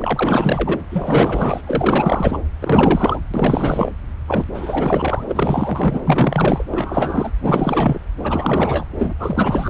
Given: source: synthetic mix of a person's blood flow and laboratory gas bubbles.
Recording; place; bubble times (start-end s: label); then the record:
Doppler ultrasound of blood flow; subclavian vein
0.00-0.80 s: bubbles
0.90-1.61 s: bubbles
1.66-2.38 s: bubbles
2.61-3.19 s: bubbles
3.33-3.93 s: bubbles
4.27-4.45 s: bubbles
4.54-6.01 s: bubbles
6.05-6.64 s: bubbles
6.71-7.31 s: bubbles
7.43-8.00 s: bubbles
8.19-8.88 s: bubbles
8.97-9.13 s: bubbles
9.19-9.70 s: bubbles
From the record:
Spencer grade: 4 (maximum detectable bubble signal sounding continuously throughout systole and diastole of every cardiac period, and overriding the amplitude of the normal cardiac signals); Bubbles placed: anywhere in the cardiac cycle